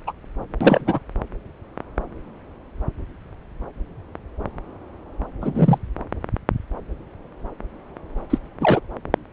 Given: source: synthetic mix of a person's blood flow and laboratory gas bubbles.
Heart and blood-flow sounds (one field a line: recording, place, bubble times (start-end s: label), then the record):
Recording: Doppler ultrasound of blood flow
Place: subclavian vein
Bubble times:
0.07-0.12 s: bubbles
0.60-1.00 s: bubbles
5.41-5.78 s: bubbles
8.29-8.38 s: bubbles
8.60-8.80 s: bubbles
From the record:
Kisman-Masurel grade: 223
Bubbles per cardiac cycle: several, 3 to 8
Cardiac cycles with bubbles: 10 to 50%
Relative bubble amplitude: loud (0.450 to 0.775)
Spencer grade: 2 (many but less than half of the cardiac periods contain bubble signals, singularly or in groups)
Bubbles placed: anywhere in the cardiac cycle